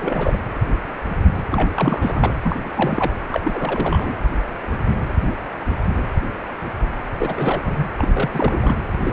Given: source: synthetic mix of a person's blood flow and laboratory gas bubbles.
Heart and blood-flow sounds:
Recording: Doppler ultrasound of blood flow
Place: precordium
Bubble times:
0.00-0.39 s: bubbles
1.50-1.69 s: bubbles
1.74-2.36 s: bubbles
2.43-2.55 s: bubbles
2.65-2.71 s: bubbles
2.76-3.13 s: bubbles
3.31-4.15 s: bubbles
7.19-7.87 s: bubbles
7.98-8.08 s: bubbles
8.13-8.75 s: bubbles
9.04-9.13 s: bubbles
From the record:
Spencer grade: 3 (all of the cardiac periods contain showers or single bubble signals, but not dominating or overriding the cardiac motion signals)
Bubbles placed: anywhere in the cardiac cycle

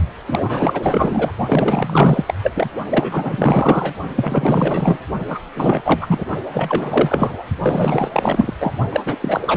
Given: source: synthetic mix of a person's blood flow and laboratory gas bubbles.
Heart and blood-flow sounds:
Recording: Doppler ultrasound of blood flow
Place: precordium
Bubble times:
0.27-1.32 s: bubbles
1.46-2.25 s: bubbles
2.27-2.33 s: bubbles
2.42-2.51 s: bubbles
2.54-2.70 s: bubbles
2.90-3.94 s: bubbles
4.15-4.99 s: bubbles
5.27-5.39 s: bubbles
5.55-5.82 s: bubbles
5.85-6.26 s: bubbles
6.53-7.43 s: bubbles
7.60-8.54 s: bubbles
8.60-8.71 s: bubbles
8.91-9.00 s: bubbles
9.05-9.16 s: bubbles
9.21-9.57 s: bubbles
From the record:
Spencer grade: 4 (maximum detectable bubble signal sounding continuously throughout systole and diastole of every cardiac period, and overriding the amplitude of the normal cardiac signals)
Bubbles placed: only in the low amplitude regions of the cardiac cycle

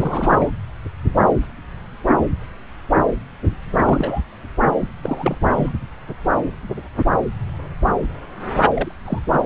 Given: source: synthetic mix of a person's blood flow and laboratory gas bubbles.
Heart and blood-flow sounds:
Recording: Doppler ultrasound of blood flow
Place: subclavian vein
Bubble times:
0.00-0.50 s: bubbles
3.76-4.21 s: bubbles
4.80-4.88 s: bubbles
5.03-5.38 s: bubbles
5.49-5.74 s: bubbles
8.73-8.92 s: bubbles
9.04-9.19 s: bubbles
9.31-9.39 s: bubbles
From the record:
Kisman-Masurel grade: 222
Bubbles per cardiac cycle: several, 3 to 8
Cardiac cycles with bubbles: 10 to 50%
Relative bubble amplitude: moderate (0.250 to 0.450)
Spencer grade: 2 (many but less than half of the cardiac periods contain bubble signals, singularly or in groups)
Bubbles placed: anywhere in the cardiac cycle

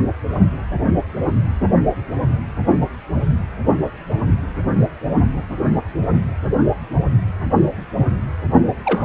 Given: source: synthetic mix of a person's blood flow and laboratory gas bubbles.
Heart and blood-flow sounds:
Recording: Doppler ultrasound of blood flow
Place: precordium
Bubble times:
8.85-9.05 s: bubbles
From the record:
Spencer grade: 1 (occasional bubble signal discernible with the cardiac motion signal, with majority of cardiac periods free of bubbles)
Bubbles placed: only in the low amplitude regions of the cardiac cycle

